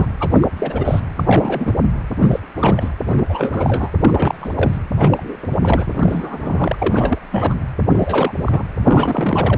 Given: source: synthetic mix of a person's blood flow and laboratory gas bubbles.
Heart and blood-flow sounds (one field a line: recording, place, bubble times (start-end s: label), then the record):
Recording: Doppler ultrasound of blood flow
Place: precordium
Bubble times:
0.00-0.06 s: bubbles
0.20-0.47 s: bubbles
0.57-1.00 s: bubbles
1.16-1.74 s: bubbles
2.20-2.40 s: bubbles
2.56-2.90 s: bubbles
3.05-3.23 s: bubbles
3.28-3.90 s: bubbles
4.00-4.79 s: bubbles
4.96-5.38 s: bubbles
5.42-5.46 s: bubbles
5.50-5.56 s: bubbles
5.61-5.86 s: bubbles
5.91-7.18 s: bubbles
7.31-7.54 s: bubbles
7.89-8.32 s: bubbles
8.46-8.63 s: bubbles
8.84-9.57 s: bubbles
From the record:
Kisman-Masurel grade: 332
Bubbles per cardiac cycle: rolling drumbeat, 9 or more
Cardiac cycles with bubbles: 50 to 99%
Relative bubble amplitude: moderate (0.250 to 0.450)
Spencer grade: 3 (all of the cardiac periods contain showers or single bubble signals, but not dominating or overriding the cardiac motion signals)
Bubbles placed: anywhere in the cardiac cycle